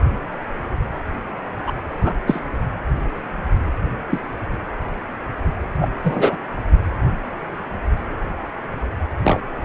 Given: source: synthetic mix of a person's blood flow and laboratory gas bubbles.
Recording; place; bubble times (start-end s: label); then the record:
Doppler ultrasound of blood flow; precordium
1.66-1.71 s: bubbles
2.01-2.13 s: bubbles
2.27-2.41 s: bubbles
4.10-4.20 s: bubbles
5.80-5.88 s: bubbles
6.04-6.37 s: bubbles
9.24-9.40 s: bubbles
From the record:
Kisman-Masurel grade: 123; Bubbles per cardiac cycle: 1 to 2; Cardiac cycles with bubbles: 10 to 50%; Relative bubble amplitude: loud (0.450 to 0.775); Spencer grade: 2 (many but less than half of the cardiac periods contain bubble signals, singularly or in groups); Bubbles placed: anywhere in the cardiac cycle